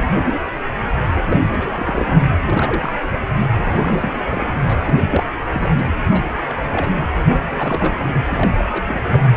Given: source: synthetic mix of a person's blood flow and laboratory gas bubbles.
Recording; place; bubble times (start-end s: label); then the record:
Doppler ultrasound of blood flow; precordium
0.00-0.18 s: bubbles
1.15-1.40 s: bubbles
1.48-2.24 s: bubbles
2.42-2.92 s: bubbles
3.53-4.52 s: bubbles
4.68-4.75 s: bubbles
4.83-4.96 s: bubbles
5.00-5.24 s: bubbles
5.54-5.70 s: bubbles
5.78-5.84 s: bubbles
6.11-6.34 s: bubbles
6.48-7.10 s: bubbles
7.49-8.21 s: bubbles
8.29-8.54 s: bubbles
8.58-8.65 s: bubbles
8.71-9.22 s: bubbles
From the record:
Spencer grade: 3 (all of the cardiac periods contain showers or single bubble signals, but not dominating or overriding the cardiac motion signals); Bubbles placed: anywhere in the cardiac cycle